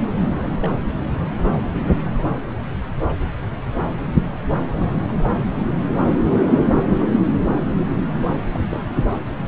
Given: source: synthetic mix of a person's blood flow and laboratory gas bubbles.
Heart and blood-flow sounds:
Doppler ultrasound of blood flow; subclavian vein
0.34-0.53 s: bubbles
0.61-0.96 s: bubbles
4.74-4.90 s: bubbles
5.07-5.36 s: bubbles
8.16-8.44 s: bubbles
8.51-8.60 s: bubbles
8.71-8.80 s: bubbles
From the record:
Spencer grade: 2 (many but less than half of the cardiac periods contain bubble signals, singularly or in groups); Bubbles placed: anywhere in the cardiac cycle

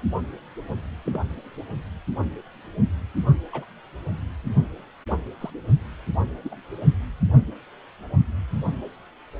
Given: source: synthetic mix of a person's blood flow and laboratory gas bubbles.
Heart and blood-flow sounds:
Doppler ultrasound of blood flow; precordium
1.06-1.21 s: bubbles
3.52-3.65 s: bubbles
5.40-5.50 s: bubbles
6.44-6.55 s: bubbles
From the record:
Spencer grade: 2 (many but less than half of the cardiac periods contain bubble signals, singularly or in groups); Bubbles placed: only in the low amplitude regions of the cardiac cycle

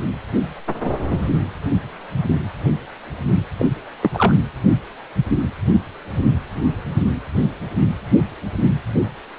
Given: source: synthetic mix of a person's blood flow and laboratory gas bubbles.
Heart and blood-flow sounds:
Doppler ultrasound of blood flow; precordium
3.59-3.70 s: bubbles
4.01-4.11 s: bubbles
4.13-4.35 s: bubbles
From the record:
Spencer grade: 2 (many but less than half of the cardiac periods contain bubble signals, singularly or in groups); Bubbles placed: anywhere in the cardiac cycle

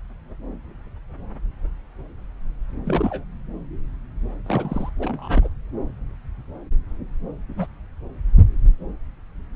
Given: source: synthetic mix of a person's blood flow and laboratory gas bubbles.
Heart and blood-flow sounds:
Doppler ultrasound of blood flow; subclavian vein
2.85-3.23 s: bubbles
4.46-4.89 s: bubbles
4.99-5.48 s: bubbles
7.48-7.53 s: bubbles
7.57-7.67 s: bubbles
From the record:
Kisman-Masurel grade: 221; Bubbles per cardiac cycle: several, 3 to 8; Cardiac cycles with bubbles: 10 to 50%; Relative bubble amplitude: barely perceptible (0.100 to 0.250); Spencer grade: 2 (many but less than half of the cardiac periods contain bubble signals, singularly or in groups); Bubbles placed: anywhere in the cardiac cycle

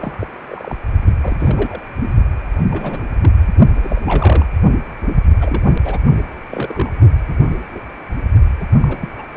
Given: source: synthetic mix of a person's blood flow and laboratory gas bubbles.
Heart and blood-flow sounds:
Doppler ultrasound of blood flow; precordium
0.00-0.27 s: bubbles
0.47-0.76 s: bubbles
1.22-1.82 s: bubbles
2.71-3.07 s: bubbles
3.21-3.30 s: bubbles
3.83-4.47 s: bubbles
5.40-5.80 s: bubbles
5.84-5.98 s: bubbles
6.50-6.92 s: bubbles
7.28-7.47 s: bubbles
7.51-7.56 s: bubbles
7.71-7.80 s: bubbles
8.60-8.64 s: bubbles
8.80-9.26 s: bubbles
9.33-9.37 s: bubbles
From the record:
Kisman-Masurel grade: 232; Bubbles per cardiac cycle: several, 3 to 8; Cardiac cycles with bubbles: 50 to 99%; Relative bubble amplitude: moderate (0.250 to 0.450); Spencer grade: 3 (all of the cardiac periods contain showers or single bubble signals, but not dominating or overriding the cardiac motion signals); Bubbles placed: only in the low amplitude regions of the cardiac cycle

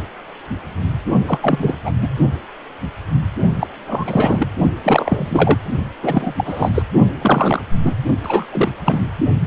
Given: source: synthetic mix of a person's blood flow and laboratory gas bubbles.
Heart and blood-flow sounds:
Doppler ultrasound of blood flow; precordium
1.26-1.39 s: bubbles
1.42-1.76 s: bubbles
1.85-1.91 s: bubbles
2.01-2.08 s: bubbles
3.59-3.67 s: bubbles
3.86-4.47 s: bubbles
4.84-5.57 s: bubbles
6.01-6.69 s: bubbles
6.74-6.83 s: bubbles
7.18-7.64 s: bubbles
7.83-7.98 s: bubbles
8.23-8.71 s: bubbles
8.84-9.06 s: bubbles
From the record:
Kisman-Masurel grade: 333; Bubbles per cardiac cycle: rolling drumbeat, 9 or more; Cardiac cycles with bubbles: 50 to 99%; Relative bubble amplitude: loud (0.450 to 0.775); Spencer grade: 3 (all of the cardiac periods contain showers or single bubble signals, but not dominating or overriding the cardiac motion signals); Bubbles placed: only in the low amplitude regions of the cardiac cycle

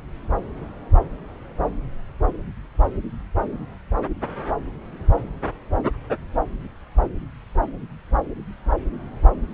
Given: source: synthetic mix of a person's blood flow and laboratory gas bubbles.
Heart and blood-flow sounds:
Doppler ultrasound of blood flow; subclavian vein
no bubbles
From the record:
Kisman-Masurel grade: 000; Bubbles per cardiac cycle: 0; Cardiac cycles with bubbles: 0%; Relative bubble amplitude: no bubbles discernible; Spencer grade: 0 (complete lack of bubble signals)

